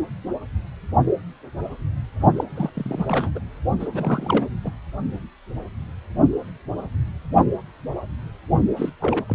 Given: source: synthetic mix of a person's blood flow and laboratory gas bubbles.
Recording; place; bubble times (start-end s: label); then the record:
Doppler ultrasound of blood flow; precordium
2.36-2.44 s: bubbles
2.55-2.70 s: bubbles
2.75-3.31 s: bubbles
3.35-3.40 s: bubbles
3.79-3.88 s: bubbles
3.93-4.46 s: bubbles
4.64-4.71 s: bubbles
8.77-8.89 s: bubbles
9.00-9.25 s: bubbles
9.28-9.35 s: bubbles
From the record:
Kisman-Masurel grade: 332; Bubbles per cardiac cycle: rolling drumbeat, 9 or more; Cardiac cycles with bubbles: 50 to 99%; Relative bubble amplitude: moderate (0.250 to 0.450); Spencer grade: 3 (all of the cardiac periods contain showers or single bubble signals, but not dominating or overriding the cardiac motion signals); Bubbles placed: only in the low amplitude regions of the cardiac cycle